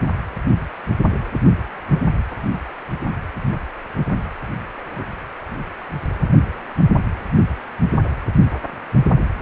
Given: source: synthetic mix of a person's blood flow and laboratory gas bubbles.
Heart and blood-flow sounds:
Doppler ultrasound of blood flow; precordium
no bubbles
From the record:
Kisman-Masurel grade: 000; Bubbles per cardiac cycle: 0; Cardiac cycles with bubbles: 0%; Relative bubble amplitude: no bubbles discernible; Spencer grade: 0 (complete lack of bubble signals)

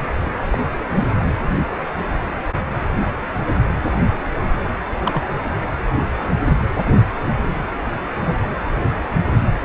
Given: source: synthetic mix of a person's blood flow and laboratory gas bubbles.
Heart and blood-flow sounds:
Doppler ultrasound of blood flow; precordium
0.00-0.03 s: bubbles
0.52-0.58 s: bubbles
0.90-1.14 s: bubbles
5.04-5.22 s: bubbles
8.25-8.38 s: bubbles
From the record:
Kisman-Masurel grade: 122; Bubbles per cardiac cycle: 1 to 2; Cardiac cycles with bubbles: 10 to 50%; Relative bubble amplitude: moderate (0.250 to 0.450); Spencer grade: 2 (many but less than half of the cardiac periods contain bubble signals, singularly or in groups); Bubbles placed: anywhere in the cardiac cycle

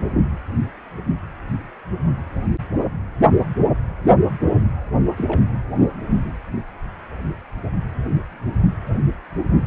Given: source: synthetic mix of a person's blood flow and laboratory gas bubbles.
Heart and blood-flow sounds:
Doppler ultrasound of blood flow; precordium
5.16-5.43 s: bubbles
From the record:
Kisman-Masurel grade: 121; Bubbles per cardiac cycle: 1 to 2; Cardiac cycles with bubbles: 10 to 50%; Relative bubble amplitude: barely perceptible (0.100 to 0.250); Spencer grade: 2 (many but less than half of the cardiac periods contain bubble signals, singularly or in groups); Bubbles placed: only in the low amplitude regions of the cardiac cycle

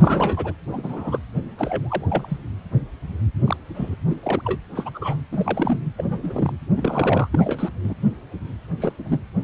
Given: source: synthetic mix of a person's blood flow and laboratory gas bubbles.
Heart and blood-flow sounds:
Doppler ultrasound of blood flow; precordium
0.00-0.53 s: bubbles
0.69-1.19 s: bubbles
1.58-2.38 s: bubbles
3.44-3.56 s: bubbles
3.74-3.96 s: bubbles
4.10-4.15 s: bubbles
4.22-4.42 s: bubbles
4.45-4.58 s: bubbles
4.75-5.21 s: bubbles
5.31-5.80 s: bubbles
5.97-6.53 s: bubbles
6.76-7.28 s: bubbles
7.32-7.70 s: bubbles
7.83-7.94 s: bubbles
8.80-8.93 s: bubbles
9.04-9.19 s: bubbles
9.40-9.44 s: bubbles
From the record:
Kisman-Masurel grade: 232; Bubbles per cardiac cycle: several, 3 to 8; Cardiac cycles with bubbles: 50 to 99%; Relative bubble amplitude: moderate (0.250 to 0.450); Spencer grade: 3 (all of the cardiac periods contain showers or single bubble signals, but not dominating or overriding the cardiac motion signals); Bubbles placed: anywhere in the cardiac cycle

